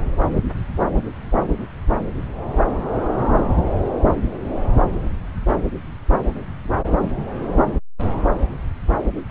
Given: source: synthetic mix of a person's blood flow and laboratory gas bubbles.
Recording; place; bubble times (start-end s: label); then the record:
Doppler ultrasound of blood flow; subclavian vein
9.29-9.31 s: bubbles
From the record:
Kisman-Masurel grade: 113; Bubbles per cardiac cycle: 1 to 2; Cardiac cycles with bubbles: 1 to 10%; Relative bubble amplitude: loud (0.450 to 0.775); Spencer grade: 1 (occasional bubble signal discernible with the cardiac motion signal, with majority of cardiac periods free of bubbles); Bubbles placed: anywhere in the cardiac cycle